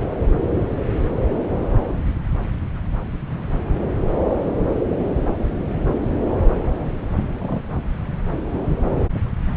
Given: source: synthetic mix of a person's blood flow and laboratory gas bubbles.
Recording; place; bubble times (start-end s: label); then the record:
Doppler ultrasound of blood flow; subclavian vein
7.40-7.61 s: bubbles
From the record:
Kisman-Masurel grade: 111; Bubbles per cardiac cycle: 1 to 2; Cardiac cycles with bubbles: 1 to 10%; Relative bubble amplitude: barely perceptible (0.100 to 0.250); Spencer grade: 1 (occasional bubble signal discernible with the cardiac motion signal, with majority of cardiac periods free of bubbles); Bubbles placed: anywhere in the cardiac cycle